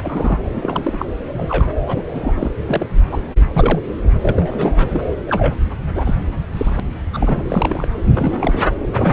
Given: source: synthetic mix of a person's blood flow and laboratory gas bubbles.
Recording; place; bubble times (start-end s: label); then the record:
Doppler ultrasound of blood flow; subclavian vein
0.03-0.39 s: bubbles
0.55-1.06 s: bubbles
1.32-1.69 s: bubbles
1.87-2.03 s: bubbles
2.13-2.50 s: bubbles
2.66-2.87 s: bubbles
3.11-3.21 s: bubbles
3.54-3.81 s: bubbles
4.21-5.05 s: bubbles
5.26-5.54 s: bubbles
5.94-6.15 s: bubbles
6.53-6.80 s: bubbles
7.13-7.43 s: bubbles
7.49-7.88 s: bubbles
8.14-8.63 s: bubbles
8.93-9.13 s: bubbles
From the record:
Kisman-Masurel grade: 242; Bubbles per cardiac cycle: several, 3 to 8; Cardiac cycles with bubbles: 100%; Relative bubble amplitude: moderate (0.250 to 0.450); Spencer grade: 3 (all of the cardiac periods contain showers or single bubble signals, but not dominating or overriding the cardiac motion signals); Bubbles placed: anywhere in the cardiac cycle